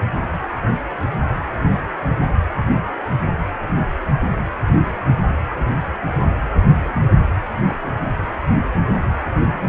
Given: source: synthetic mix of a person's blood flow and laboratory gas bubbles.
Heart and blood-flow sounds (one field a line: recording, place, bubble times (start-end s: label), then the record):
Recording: Doppler ultrasound of blood flow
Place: precordium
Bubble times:
6.92-7.00 s: bubbles
7.70-7.75 s: bubbles
From the record:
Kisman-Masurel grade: 111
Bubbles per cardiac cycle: 1 to 2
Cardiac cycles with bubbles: 1 to 10%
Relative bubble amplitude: barely perceptible (0.100 to 0.250)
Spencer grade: 1 (occasional bubble signal discernible with the cardiac motion signal, with majority of cardiac periods free of bubbles)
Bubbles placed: anywhere in the cardiac cycle